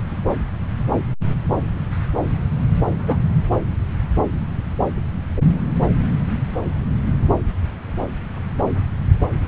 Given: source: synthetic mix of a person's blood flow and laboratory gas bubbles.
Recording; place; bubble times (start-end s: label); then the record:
Doppler ultrasound of blood flow; subclavian vein
3.07-3.16 s: bubbles
From the record:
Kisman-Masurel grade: 113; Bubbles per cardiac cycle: 1 to 2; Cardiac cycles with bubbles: 1 to 10%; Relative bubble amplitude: loud (0.450 to 0.775); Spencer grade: 1 (occasional bubble signal discernible with the cardiac motion signal, with majority of cardiac periods free of bubbles); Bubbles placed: anywhere in the cardiac cycle